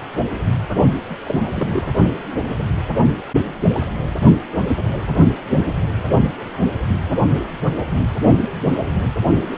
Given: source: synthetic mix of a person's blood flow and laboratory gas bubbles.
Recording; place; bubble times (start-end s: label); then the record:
Doppler ultrasound of blood flow; precordium
1.09-1.15 s: bubbles
1.23-1.49 s: bubbles
1.56-1.94 s: bubbles
From the record:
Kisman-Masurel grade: 212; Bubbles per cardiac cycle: several, 3 to 8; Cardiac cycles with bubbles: 1 to 10%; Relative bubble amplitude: moderate (0.250 to 0.450); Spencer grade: 1 (occasional bubble signal discernible with the cardiac motion signal, with majority of cardiac periods free of bubbles); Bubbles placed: only in the low amplitude regions of the cardiac cycle